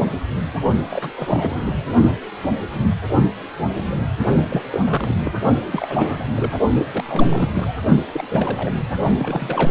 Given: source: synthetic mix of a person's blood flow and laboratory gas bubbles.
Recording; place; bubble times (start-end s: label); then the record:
Doppler ultrasound of blood flow; precordium
0.91-1.11 s: bubbles
1.15-1.76 s: bubbles
4.47-4.62 s: bubbles
4.71-5.32 s: bubbles
5.45-5.54 s: bubbles
5.71-6.22 s: bubbles
6.35-6.57 s: bubbles
6.93-7.04 s: bubbles
7.07-7.85 s: bubbles
8.12-8.23 s: bubbles
8.30-8.77 s: bubbles
9.18-9.71 s: bubbles
From the record:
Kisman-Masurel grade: 332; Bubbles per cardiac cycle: rolling drumbeat, 9 or more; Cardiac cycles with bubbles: 50 to 99%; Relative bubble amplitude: moderate (0.250 to 0.450); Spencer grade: 3 (all of the cardiac periods contain showers or single bubble signals, but not dominating or overriding the cardiac motion signals); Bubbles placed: only in the low amplitude regions of the cardiac cycle